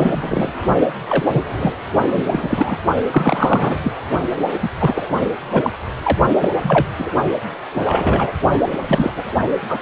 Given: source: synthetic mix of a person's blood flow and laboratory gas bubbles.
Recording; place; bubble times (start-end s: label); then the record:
Doppler ultrasound of blood flow; precordium
0.00-0.49 s: bubbles
1.09-1.25 s: bubbles
1.33-1.43 s: bubbles
1.59-1.73 s: bubbles
2.12-2.23 s: bubbles
2.31-2.77 s: bubbles
3.10-3.77 s: bubbles
3.83-3.92 s: bubbles
4.24-4.47 s: bubbles
4.61-4.71 s: bubbles
4.78-5.09 s: bubbles
5.51-5.71 s: bubbles
6.03-6.17 s: bubbles
6.41-6.54 s: bubbles
6.63-6.87 s: bubbles
6.97-7.10 s: bubbles
7.75-8.32 s: bubbles
8.73-8.78 s: bubbles
8.82-9.12 s: bubbles
9.16-9.23 s: bubbles
9.69-9.79 s: bubbles
From the record:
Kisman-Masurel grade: 243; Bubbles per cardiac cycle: several, 3 to 8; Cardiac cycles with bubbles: 100%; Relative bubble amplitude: loud (0.450 to 0.775); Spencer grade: 3 (all of the cardiac periods contain showers or single bubble signals, but not dominating or overriding the cardiac motion signals); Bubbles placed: only in the low amplitude regions of the cardiac cycle